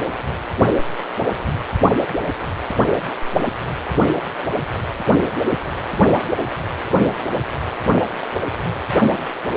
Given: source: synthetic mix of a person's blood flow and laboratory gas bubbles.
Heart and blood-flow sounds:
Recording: Doppler ultrasound of blood flow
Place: precordium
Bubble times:
no bubbles
From the record:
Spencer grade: 0 (complete lack of bubble signals)

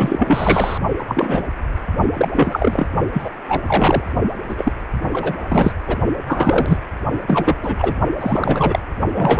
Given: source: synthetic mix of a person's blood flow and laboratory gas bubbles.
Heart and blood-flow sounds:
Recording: Doppler ultrasound of blood flow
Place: precordium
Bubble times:
0.00-0.78 s: bubbles
0.99-1.04 s: bubbles
1.08-1.48 s: bubbles
2.13-2.28 s: bubbles
2.35-2.88 s: bubbles
3.13-3.29 s: bubbles
3.48-3.62 s: bubbles
3.65-4.12 s: bubbles
4.48-4.55 s: bubbles
4.57-4.72 s: bubbles
5.11-5.34 s: bubbles
5.49-5.73 s: bubbles
5.86-5.97 s: bubbles
6.27-6.78 s: bubbles
7.27-7.56 s: bubbles
7.61-7.95 s: bubbles
8.20-8.79 s: bubbles
9.12-9.39 s: bubbles
From the record:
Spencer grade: 3 (all of the cardiac periods contain showers or single bubble signals, but not dominating or overriding the cardiac motion signals)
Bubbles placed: only in the low amplitude regions of the cardiac cycle

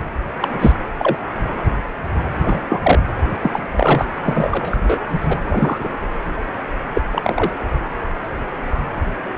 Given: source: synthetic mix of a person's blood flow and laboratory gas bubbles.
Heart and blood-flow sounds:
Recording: Doppler ultrasound of blood flow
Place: precordium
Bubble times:
0.00-0.02 s: bubbles
0.40-0.48 s: bubbles
0.59-0.72 s: bubbles
0.98-1.17 s: bubbles
2.43-2.61 s: bubbles
2.69-2.80 s: bubbles
2.82-2.99 s: bubbles
3.40-3.66 s: bubbles
3.72-4.07 s: bubbles
4.21-4.77 s: bubbles
4.83-5.00 s: bubbles
5.28-5.41 s: bubbles
5.44-5.88 s: bubbles
6.95-7.02 s: bubbles
7.11-7.50 s: bubbles
From the record:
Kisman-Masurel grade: 233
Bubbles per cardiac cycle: several, 3 to 8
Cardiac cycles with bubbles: 50 to 99%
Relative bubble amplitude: loud (0.450 to 0.775)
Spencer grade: 3 (all of the cardiac periods contain showers or single bubble signals, but not dominating or overriding the cardiac motion signals)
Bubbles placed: anywhere in the cardiac cycle

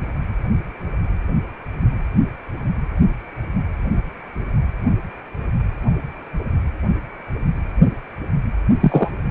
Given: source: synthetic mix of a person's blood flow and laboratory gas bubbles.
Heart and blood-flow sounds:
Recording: Doppler ultrasound of blood flow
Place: precordium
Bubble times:
8.80-9.11 s: bubbles
From the record:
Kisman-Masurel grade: 113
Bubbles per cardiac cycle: 1 to 2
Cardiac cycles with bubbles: 1 to 10%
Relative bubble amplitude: loud (0.450 to 0.775)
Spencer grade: 1 (occasional bubble signal discernible with the cardiac motion signal, with majority of cardiac periods free of bubbles)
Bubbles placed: only in the low amplitude regions of the cardiac cycle

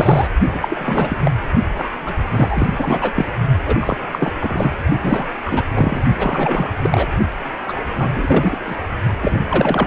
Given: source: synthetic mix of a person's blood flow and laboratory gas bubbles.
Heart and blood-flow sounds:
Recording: Doppler ultrasound of blood flow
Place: precordium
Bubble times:
0.00-0.29 s: bubbles
0.54-1.17 s: bubbles
1.24-1.31 s: bubbles
1.75-1.91 s: bubbles
2.06-2.14 s: bubbles
2.30-2.67 s: bubbles
2.69-3.26 s: bubbles
3.65-3.76 s: bubbles
3.80-3.97 s: bubbles
4.12-4.32 s: bubbles
4.41-4.78 s: bubbles
5.02-5.25 s: bubbles
5.45-5.63 s: bubbles
5.74-6.02 s: bubbles
6.19-6.71 s: bubbles
6.82-7.07 s: bubbles
7.67-7.81 s: bubbles
7.97-8.09 s: bubbles
8.15-8.58 s: bubbles
8.65-8.76 s: bubbles
9.20-9.40 s: bubbles
9.49-9.87 s: bubbles
From the record:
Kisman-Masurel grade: 342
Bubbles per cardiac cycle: rolling drumbeat, 9 or more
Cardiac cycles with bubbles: 100%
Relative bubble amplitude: moderate (0.250 to 0.450)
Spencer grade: 3 (all of the cardiac periods contain showers or single bubble signals, but not dominating or overriding the cardiac motion signals)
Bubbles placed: only in the low amplitude regions of the cardiac cycle

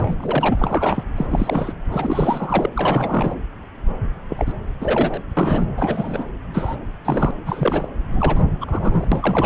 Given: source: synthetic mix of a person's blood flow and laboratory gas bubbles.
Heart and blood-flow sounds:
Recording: Doppler ultrasound of blood flow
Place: subclavian vein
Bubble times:
0.00-0.55 s: bubbles
0.58-1.03 s: bubbles
1.17-1.26 s: bubbles
1.30-1.74 s: bubbles
1.91-2.70 s: bubbles
2.76-3.34 s: bubbles
4.29-4.53 s: bubbles
4.81-5.21 s: bubbles
5.37-5.66 s: bubbles
5.77-6.24 s: bubbles
6.54-6.76 s: bubbles
7.04-7.31 s: bubbles
7.46-7.88 s: bubbles
8.12-8.44 s: bubbles
8.60-9.07 s: bubbles
9.12-9.46 s: bubbles
From the record:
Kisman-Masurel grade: 332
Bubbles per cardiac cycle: rolling drumbeat, 9 or more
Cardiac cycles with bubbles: 50 to 99%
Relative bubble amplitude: moderate (0.250 to 0.450)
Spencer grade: 3 (all of the cardiac periods contain showers or single bubble signals, but not dominating or overriding the cardiac motion signals)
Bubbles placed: anywhere in the cardiac cycle

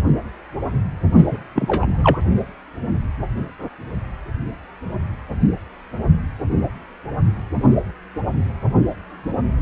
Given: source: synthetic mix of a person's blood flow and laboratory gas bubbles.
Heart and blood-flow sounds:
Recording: Doppler ultrasound of blood flow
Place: precordium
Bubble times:
1.15-1.27 s: bubbles
1.31-1.38 s: bubbles
1.56-2.18 s: bubbles
From the record:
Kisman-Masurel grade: 213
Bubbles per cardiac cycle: several, 3 to 8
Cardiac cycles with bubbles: 1 to 10%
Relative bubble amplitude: loud (0.450 to 0.775)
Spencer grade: 1 (occasional bubble signal discernible with the cardiac motion signal, with majority of cardiac periods free of bubbles)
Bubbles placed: anywhere in the cardiac cycle

